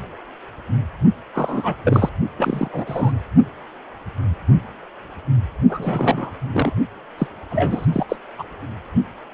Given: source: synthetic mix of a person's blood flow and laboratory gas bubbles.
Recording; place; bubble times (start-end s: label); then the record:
Doppler ultrasound of blood flow; precordium
1.34-1.76 s: bubbles
1.85-2.09 s: bubbles
2.38-2.68 s: bubbles
2.72-3.12 s: bubbles
5.69-6.33 s: bubbles
6.53-6.73 s: bubbles
7.18-7.28 s: bubbles
7.50-7.87 s: bubbles
7.92-8.05 s: bubbles
8.09-8.16 s: bubbles
8.38-8.43 s: bubbles
From the record:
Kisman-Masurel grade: 232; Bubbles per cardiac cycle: several, 3 to 8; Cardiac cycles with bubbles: 50 to 99%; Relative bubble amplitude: moderate (0.250 to 0.450); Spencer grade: 3 (all of the cardiac periods contain showers or single bubble signals, but not dominating or overriding the cardiac motion signals); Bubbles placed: only in the low amplitude regions of the cardiac cycle